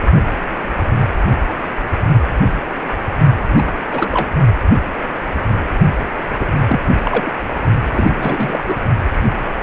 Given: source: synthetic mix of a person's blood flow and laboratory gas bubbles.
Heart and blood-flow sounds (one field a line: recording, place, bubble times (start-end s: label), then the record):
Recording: Doppler ultrasound of blood flow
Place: precordium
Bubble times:
3.57-3.73 s: bubbles
3.89-4.09 s: bubbles
4.11-4.31 s: bubbles
6.39-6.52 s: bubbles
6.67-6.80 s: bubbles
7.04-7.31 s: bubbles
7.92-8.63 s: bubbles
8.68-8.76 s: bubbles
From the record:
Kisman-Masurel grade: 222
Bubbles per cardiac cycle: several, 3 to 8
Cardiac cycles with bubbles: 10 to 50%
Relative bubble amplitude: moderate (0.250 to 0.450)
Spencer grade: 2 (many but less than half of the cardiac periods contain bubble signals, singularly or in groups)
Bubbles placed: only in the low amplitude regions of the cardiac cycle